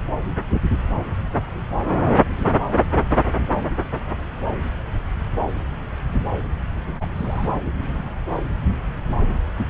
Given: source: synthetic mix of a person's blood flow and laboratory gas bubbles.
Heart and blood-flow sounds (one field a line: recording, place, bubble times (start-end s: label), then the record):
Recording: Doppler ultrasound of blood flow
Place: subclavian vein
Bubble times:
7.00-7.06 s: bubbles
7.14-7.49 s: bubbles
From the record:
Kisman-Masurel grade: 112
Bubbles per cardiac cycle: 1 to 2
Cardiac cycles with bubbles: 1 to 10%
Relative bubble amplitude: moderate (0.250 to 0.450)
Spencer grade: 1 (occasional bubble signal discernible with the cardiac motion signal, with majority of cardiac periods free of bubbles)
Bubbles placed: anywhere in the cardiac cycle